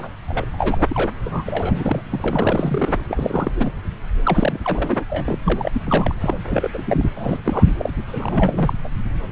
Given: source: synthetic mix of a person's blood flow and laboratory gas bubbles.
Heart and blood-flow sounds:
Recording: Doppler ultrasound of blood flow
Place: subclavian vein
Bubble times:
0.00-0.09 s: bubbles
0.28-0.45 s: bubbles
0.52-1.06 s: bubbles
1.22-2.02 s: bubbles
2.11-2.94 s: bubbles
3.08-3.51 s: bubbles
3.55-3.72 s: bubbles
4.25-4.58 s: bubbles
4.64-5.04 s: bubbles
5.09-5.38 s: bubbles
5.45-5.81 s: bubbles
5.86-6.13 s: bubbles
6.20-6.39 s: bubbles
6.47-6.68 s: bubbles
6.73-6.83 s: bubbles
6.85-7.04 s: bubbles
7.15-7.42 s: bubbles
7.44-7.75 s: bubbles
7.78-7.89 s: bubbles
8.06-8.73 s: bubbles
8.84-8.88 s: bubbles
From the record:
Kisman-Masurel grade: 342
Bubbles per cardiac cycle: rolling drumbeat, 9 or more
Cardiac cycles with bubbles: 100%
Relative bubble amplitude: moderate (0.250 to 0.450)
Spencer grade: 3 (all of the cardiac periods contain showers or single bubble signals, but not dominating or overriding the cardiac motion signals)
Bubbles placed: anywhere in the cardiac cycle

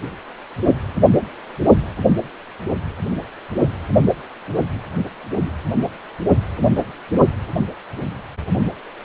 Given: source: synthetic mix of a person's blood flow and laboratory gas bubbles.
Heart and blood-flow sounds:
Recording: Doppler ultrasound of blood flow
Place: precordium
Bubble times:
5.38-5.53 s: bubbles
5.82-5.91 s: bubbles
From the record:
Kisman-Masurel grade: 111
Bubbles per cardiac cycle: 1 to 2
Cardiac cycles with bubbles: 1 to 10%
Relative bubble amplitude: barely perceptible (0.100 to 0.250)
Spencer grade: 1 (occasional bubble signal discernible with the cardiac motion signal, with majority of cardiac periods free of bubbles)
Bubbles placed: only in the low amplitude regions of the cardiac cycle

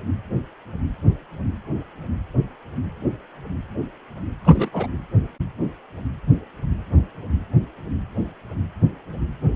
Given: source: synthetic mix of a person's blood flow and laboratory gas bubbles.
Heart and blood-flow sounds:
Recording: Doppler ultrasound of blood flow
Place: precordium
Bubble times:
4.44-4.69 s: bubbles
4.72-4.86 s: bubbles
From the record:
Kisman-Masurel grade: 212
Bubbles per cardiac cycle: several, 3 to 8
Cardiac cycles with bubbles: 1 to 10%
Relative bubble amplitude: moderate (0.250 to 0.450)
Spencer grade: 1 (occasional bubble signal discernible with the cardiac motion signal, with majority of cardiac periods free of bubbles)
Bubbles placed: anywhere in the cardiac cycle

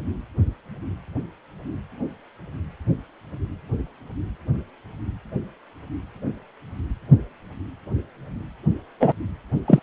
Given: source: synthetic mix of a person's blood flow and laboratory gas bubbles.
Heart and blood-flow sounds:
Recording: Doppler ultrasound of blood flow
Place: precordium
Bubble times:
9.00-9.12 s: bubbles
9.67-9.79 s: bubbles
From the record:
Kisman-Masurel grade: 213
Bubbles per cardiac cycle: several, 3 to 8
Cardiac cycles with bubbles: 1 to 10%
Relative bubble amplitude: loud (0.450 to 0.775)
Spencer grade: 1 (occasional bubble signal discernible with the cardiac motion signal, with majority of cardiac periods free of bubbles)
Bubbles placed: only in the low amplitude regions of the cardiac cycle

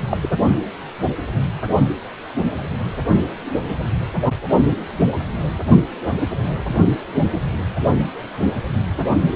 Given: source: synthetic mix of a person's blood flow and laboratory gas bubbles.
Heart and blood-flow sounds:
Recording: Doppler ultrasound of blood flow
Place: precordium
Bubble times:
0.11-0.17 s: bubbles
0.22-0.29 s: bubbles
From the record:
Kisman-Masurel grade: 212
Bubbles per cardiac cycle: several, 3 to 8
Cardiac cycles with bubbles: 1 to 10%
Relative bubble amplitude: moderate (0.250 to 0.450)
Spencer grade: 1 (occasional bubble signal discernible with the cardiac motion signal, with majority of cardiac periods free of bubbles)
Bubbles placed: only in the low amplitude regions of the cardiac cycle

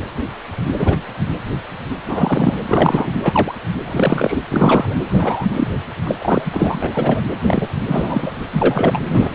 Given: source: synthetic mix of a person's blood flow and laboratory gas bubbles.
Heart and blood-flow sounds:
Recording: Doppler ultrasound of blood flow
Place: precordium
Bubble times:
0.78-0.96 s: bubbles
2.07-2.58 s: bubbles
2.67-3.12 s: bubbles
3.23-3.53 s: bubbles
3.85-4.40 s: bubbles
4.50-4.96 s: bubbles
5.08-5.46 s: bubbles
5.53-5.67 s: bubbles
6.03-6.15 s: bubbles
6.21-6.92 s: bubbles
6.95-7.21 s: bubbles
7.47-7.68 s: bubbles
7.88-8.32 s: bubbles
8.53-9.04 s: bubbles
9.08-9.35 s: bubbles
From the record:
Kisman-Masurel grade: 233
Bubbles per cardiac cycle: several, 3 to 8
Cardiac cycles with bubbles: 50 to 99%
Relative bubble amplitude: loud (0.450 to 0.775)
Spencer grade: 3 (all of the cardiac periods contain showers or single bubble signals, but not dominating or overriding the cardiac motion signals)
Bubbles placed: anywhere in the cardiac cycle

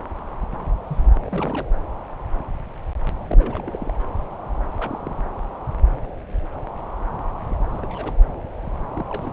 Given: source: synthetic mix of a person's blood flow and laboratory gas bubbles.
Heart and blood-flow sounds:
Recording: Doppler ultrasound of blood flow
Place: subclavian vein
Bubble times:
0.87-1.01 s: bubbles
1.26-1.68 s: bubbles
3.27-3.92 s: bubbles
4.77-5.18 s: bubbles
7.50-7.69 s: bubbles
7.71-8.14 s: bubbles
8.95-9.05 s: bubbles
9.10-9.33 s: bubbles
From the record:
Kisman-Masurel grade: 221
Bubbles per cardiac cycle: several, 3 to 8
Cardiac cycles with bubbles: 10 to 50%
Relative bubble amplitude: barely perceptible (0.100 to 0.250)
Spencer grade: 2 (many but less than half of the cardiac periods contain bubble signals, singularly or in groups)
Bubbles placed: anywhere in the cardiac cycle

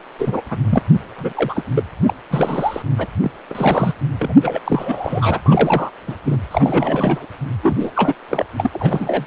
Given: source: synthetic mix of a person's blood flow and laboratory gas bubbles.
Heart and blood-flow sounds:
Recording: Doppler ultrasound of blood flow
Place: precordium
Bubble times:
0.18-0.41 s: bubbles
0.49-0.58 s: bubbles
0.70-0.82 s: bubbles
1.17-1.33 s: bubbles
1.35-1.64 s: bubbles
1.74-1.83 s: bubbles
2.04-2.13 s: bubbles
2.30-2.82 s: bubbles
2.98-3.08 s: bubbles
3.20-3.31 s: bubbles
3.49-3.92 s: bubbles
4.19-4.60 s: bubbles
4.64-5.40 s: bubbles
5.46-5.91 s: bubbles
6.07-6.16 s: bubbles
6.25-6.37 s: bubbles
6.51-7.25 s: bubbles
7.63-7.76 s: bubbles
7.79-7.91 s: bubbles
7.96-8.14 s: bubbles
8.29-8.46 s: bubbles
8.57-8.71 s: bubbles
8.73-9.25 s: bubbles
From the record:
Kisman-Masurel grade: 342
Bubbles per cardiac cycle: rolling drumbeat, 9 or more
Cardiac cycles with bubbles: 100%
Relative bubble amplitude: moderate (0.250 to 0.450)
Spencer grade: 3 (all of the cardiac periods contain showers or single bubble signals, but not dominating or overriding the cardiac motion signals)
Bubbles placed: anywhere in the cardiac cycle

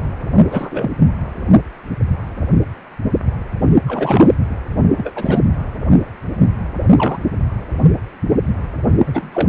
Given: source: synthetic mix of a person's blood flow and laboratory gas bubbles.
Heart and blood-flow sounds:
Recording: Doppler ultrasound of blood flow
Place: precordium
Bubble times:
0.48-0.91 s: bubbles
3.87-4.33 s: bubbles
4.94-5.43 s: bubbles
6.93-7.18 s: bubbles
9.07-9.29 s: bubbles
9.33-9.49 s: bubbles
From the record:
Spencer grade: 2 (many but less than half of the cardiac periods contain bubble signals, singularly or in groups)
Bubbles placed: anywhere in the cardiac cycle

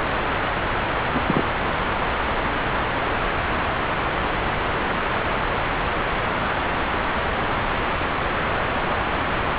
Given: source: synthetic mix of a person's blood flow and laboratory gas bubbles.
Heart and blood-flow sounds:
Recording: Doppler ultrasound of blood flow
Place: subclavian vein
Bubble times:
0.95-1.01 s: bubbles
1.14-1.21 s: bubbles
1.27-1.43 s: bubbles
From the record:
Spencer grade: 2 (many but less than half of the cardiac periods contain bubble signals, singularly or in groups)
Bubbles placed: anywhere in the cardiac cycle

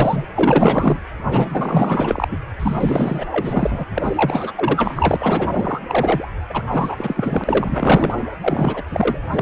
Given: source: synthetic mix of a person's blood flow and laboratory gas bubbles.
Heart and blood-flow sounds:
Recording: Doppler ultrasound of blood flow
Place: precordium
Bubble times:
0.00-0.26 s: bubbles
0.35-1.04 s: bubbles
1.30-2.28 s: bubbles
2.30-2.38 s: bubbles
2.59-3.25 s: bubbles
3.30-3.85 s: bubbles
3.93-4.52 s: bubbles
4.55-5.80 s: bubbles
5.87-6.28 s: bubbles
6.50-6.64 s: bubbles
6.72-8.14 s: bubbles
8.41-8.83 s: bubbles
8.91-9.18 s: bubbles
9.32-9.41 s: bubbles
From the record:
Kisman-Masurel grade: 444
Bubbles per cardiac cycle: continuous sound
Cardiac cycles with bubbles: 100%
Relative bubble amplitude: maximal (0.775 to 0.999)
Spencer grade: 4 (maximum detectable bubble signal sounding continuously throughout systole and diastole of every cardiac period, and overriding the amplitude of the normal cardiac signals)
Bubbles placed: anywhere in the cardiac cycle

